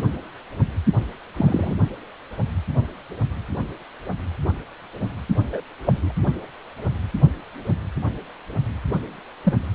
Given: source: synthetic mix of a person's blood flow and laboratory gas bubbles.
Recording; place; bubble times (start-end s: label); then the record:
Doppler ultrasound of blood flow; precordium
1.36-1.75 s: bubbles
5.41-5.61 s: bubbles
5.86-6.12 s: bubbles
9.45-9.53 s: bubbles
From the record:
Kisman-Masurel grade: 122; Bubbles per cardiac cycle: 1 to 2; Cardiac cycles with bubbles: 10 to 50%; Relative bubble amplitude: moderate (0.250 to 0.450); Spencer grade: 2 (many but less than half of the cardiac periods contain bubble signals, singularly or in groups); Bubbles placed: only in the low amplitude regions of the cardiac cycle